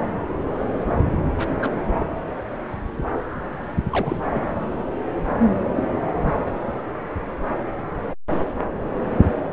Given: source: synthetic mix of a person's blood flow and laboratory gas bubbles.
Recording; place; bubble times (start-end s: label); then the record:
Doppler ultrasound of blood flow; subclavian vein
1.10-1.17 s: bubbles
1.38-1.58 s: bubbles
1.62-1.71 s: bubbles
1.96-2.06 s: bubbles
3.90-4.28 s: bubbles
4.32-4.47 s: bubbles
5.75-5.83 s: bubbles
6.03-6.08 s: bubbles
6.22-6.33 s: bubbles
From the record:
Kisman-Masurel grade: 221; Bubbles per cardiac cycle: several, 3 to 8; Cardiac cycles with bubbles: 10 to 50%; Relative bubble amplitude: barely perceptible (0.100 to 0.250); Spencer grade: 2 (many but less than half of the cardiac periods contain bubble signals, singularly or in groups); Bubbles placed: anywhere in the cardiac cycle